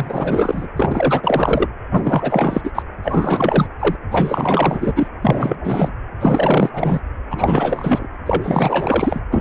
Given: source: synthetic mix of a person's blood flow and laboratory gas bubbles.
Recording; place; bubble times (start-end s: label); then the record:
Doppler ultrasound of blood flow; precordium
0.00-0.68 s: bubbles
0.76-1.67 s: bubbles
1.90-2.71 s: bubbles
2.75-2.83 s: bubbles
3.02-3.67 s: bubbles
3.80-3.96 s: bubbles
4.11-5.07 s: bubbles
5.22-5.56 s: bubbles
5.63-5.92 s: bubbles
6.20-6.69 s: bubbles
6.73-7.00 s: bubbles
7.29-8.07 s: bubbles
8.26-9.21 s: bubbles
9.31-9.41 s: bubbles
From the record:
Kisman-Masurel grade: 444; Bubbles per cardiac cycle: continuous sound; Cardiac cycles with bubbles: 100%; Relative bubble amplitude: maximal (0.775 to 0.999); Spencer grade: 4 (maximum detectable bubble signal sounding continuously throughout systole and diastole of every cardiac period, and overriding the amplitude of the normal cardiac signals); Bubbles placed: anywhere in the cardiac cycle